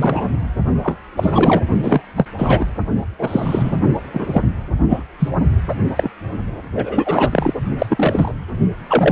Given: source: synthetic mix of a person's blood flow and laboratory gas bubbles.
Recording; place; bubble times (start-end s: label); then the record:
Doppler ultrasound of blood flow; precordium
0.00-0.28 s: bubbles
0.83-0.97 s: bubbles
1.16-1.61 s: bubbles
1.83-2.01 s: bubbles
2.16-2.25 s: bubbles
2.38-2.66 s: bubbles
3.18-3.79 s: bubbles
4.13-4.42 s: bubbles
4.89-5.04 s: bubbles
5.18-5.29 s: bubbles
5.68-5.75 s: bubbles
5.96-6.10 s: bubbles
6.75-7.54 s: bubbles
7.78-8.35 s: bubbles
8.88-9.12 s: bubbles
From the record:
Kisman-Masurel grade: 233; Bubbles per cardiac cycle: several, 3 to 8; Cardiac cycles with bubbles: 50 to 99%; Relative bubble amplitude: loud (0.450 to 0.775); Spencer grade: 3 (all of the cardiac periods contain showers or single bubble signals, but not dominating or overriding the cardiac motion signals); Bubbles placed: only in the low amplitude regions of the cardiac cycle